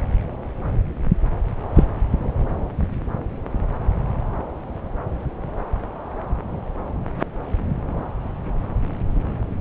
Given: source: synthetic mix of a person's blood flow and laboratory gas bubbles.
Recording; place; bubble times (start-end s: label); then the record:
Doppler ultrasound of blood flow; subclavian vein
1.75-1.85 s: bubbles
From the record:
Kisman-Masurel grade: 113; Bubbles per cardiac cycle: 1 to 2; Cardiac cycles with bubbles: 1 to 10%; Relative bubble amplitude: loud (0.450 to 0.775); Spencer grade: 1 (occasional bubble signal discernible with the cardiac motion signal, with majority of cardiac periods free of bubbles); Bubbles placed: anywhere in the cardiac cycle